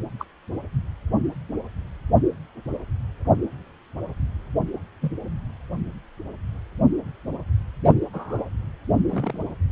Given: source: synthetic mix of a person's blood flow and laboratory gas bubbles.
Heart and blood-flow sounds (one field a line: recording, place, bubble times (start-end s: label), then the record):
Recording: Doppler ultrasound of blood flow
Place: precordium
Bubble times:
0.19-0.25 s: bubbles
5.01-5.11 s: bubbles
7.83-7.94 s: bubbles
8.13-8.43 s: bubbles
9.10-9.42 s: bubbles
From the record:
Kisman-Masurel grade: 121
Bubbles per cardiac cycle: 1 to 2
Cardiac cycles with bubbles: 10 to 50%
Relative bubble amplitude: barely perceptible (0.100 to 0.250)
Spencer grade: 2 (many but less than half of the cardiac periods contain bubble signals, singularly or in groups)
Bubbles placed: anywhere in the cardiac cycle